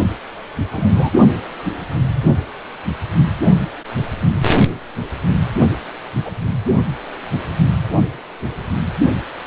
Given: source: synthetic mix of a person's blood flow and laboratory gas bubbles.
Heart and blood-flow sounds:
Doppler ultrasound of blood flow; precordium
0.71-1.12 s: bubbles
6.25-6.31 s: bubbles
From the record:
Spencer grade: 2 (many but less than half of the cardiac periods contain bubble signals, singularly or in groups); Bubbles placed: only in the low amplitude regions of the cardiac cycle

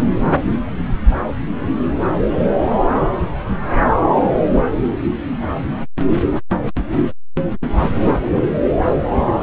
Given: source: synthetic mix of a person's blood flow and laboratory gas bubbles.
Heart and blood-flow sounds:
Doppler ultrasound of blood flow; subclavian vein
7.95-8.12 s: bubbles
8.21-8.54 s: bubbles
From the record:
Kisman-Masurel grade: 211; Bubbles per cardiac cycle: several, 3 to 8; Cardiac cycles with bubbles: 1 to 10%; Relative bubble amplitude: barely perceptible (0.100 to 0.250); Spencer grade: 1 (occasional bubble signal discernible with the cardiac motion signal, with majority of cardiac periods free of bubbles); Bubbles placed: anywhere in the cardiac cycle

